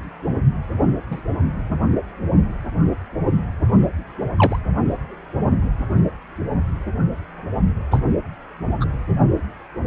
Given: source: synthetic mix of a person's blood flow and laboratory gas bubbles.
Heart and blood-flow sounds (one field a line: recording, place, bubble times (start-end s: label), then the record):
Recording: Doppler ultrasound of blood flow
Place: precordium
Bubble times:
1.10-1.21 s: bubbles
4.37-4.58 s: bubbles
7.91-8.01 s: bubbles
8.80-8.85 s: bubbles
From the record:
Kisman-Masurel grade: 123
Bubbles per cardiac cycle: 1 to 2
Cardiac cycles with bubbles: 10 to 50%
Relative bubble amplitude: loud (0.450 to 0.775)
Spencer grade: 2 (many but less than half of the cardiac periods contain bubble signals, singularly or in groups)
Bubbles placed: anywhere in the cardiac cycle